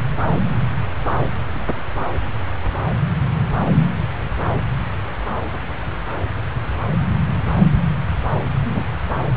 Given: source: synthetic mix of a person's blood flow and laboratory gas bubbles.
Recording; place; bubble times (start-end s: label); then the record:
Doppler ultrasound of blood flow; subclavian vein
8.71-8.86 s: bubbles
From the record:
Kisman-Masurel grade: 112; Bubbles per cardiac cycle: 1 to 2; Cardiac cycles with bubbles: 1 to 10%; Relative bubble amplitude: moderate (0.250 to 0.450); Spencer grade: 1 (occasional bubble signal discernible with the cardiac motion signal, with majority of cardiac periods free of bubbles); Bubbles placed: anywhere in the cardiac cycle